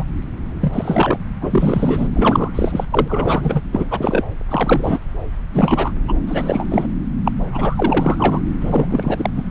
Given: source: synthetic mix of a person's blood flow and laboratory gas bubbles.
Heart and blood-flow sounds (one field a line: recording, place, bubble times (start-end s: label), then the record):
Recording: Doppler ultrasound of blood flow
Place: subclavian vein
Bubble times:
0.00-0.05 s: bubbles
0.60-1.18 s: bubbles
1.41-2.08 s: bubbles
2.12-2.85 s: bubbles
2.92-3.61 s: bubbles
3.72-4.24 s: bubbles
4.48-4.99 s: bubbles
5.54-5.92 s: bubbles
6.08-6.13 s: bubbles
6.27-6.67 s: bubbles
6.70-6.87 s: bubbles
7.25-7.32 s: bubbles
7.52-8.41 s: bubbles
8.61-9.30 s: bubbles
9.36-9.43 s: bubbles
From the record:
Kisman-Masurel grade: 343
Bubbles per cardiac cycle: rolling drumbeat, 9 or more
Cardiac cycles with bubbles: 100%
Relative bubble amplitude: loud (0.450 to 0.775)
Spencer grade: 3 (all of the cardiac periods contain showers or single bubble signals, but not dominating or overriding the cardiac motion signals)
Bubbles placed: anywhere in the cardiac cycle